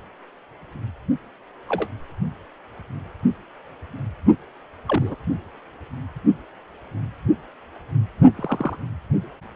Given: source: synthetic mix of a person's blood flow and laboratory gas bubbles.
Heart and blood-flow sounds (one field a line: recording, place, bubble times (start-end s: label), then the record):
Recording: Doppler ultrasound of blood flow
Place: precordium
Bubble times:
1.69-1.88 s: bubbles
4.88-5.15 s: bubbles
8.36-8.77 s: bubbles
From the record:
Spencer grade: 2 (many but less than half of the cardiac periods contain bubble signals, singularly or in groups)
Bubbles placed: only in the low amplitude regions of the cardiac cycle